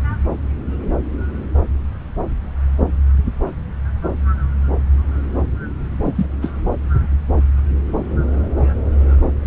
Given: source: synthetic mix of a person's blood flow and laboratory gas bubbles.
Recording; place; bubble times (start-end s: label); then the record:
Doppler ultrasound of blood flow; subclavian vein
6.03-6.27 s: bubbles
6.42-6.52 s: bubbles
From the record:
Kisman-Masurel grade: 222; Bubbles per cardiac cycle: several, 3 to 8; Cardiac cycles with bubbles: 10 to 50%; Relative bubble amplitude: moderate (0.250 to 0.450); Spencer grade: 2 (many but less than half of the cardiac periods contain bubble signals, singularly or in groups); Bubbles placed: anywhere in the cardiac cycle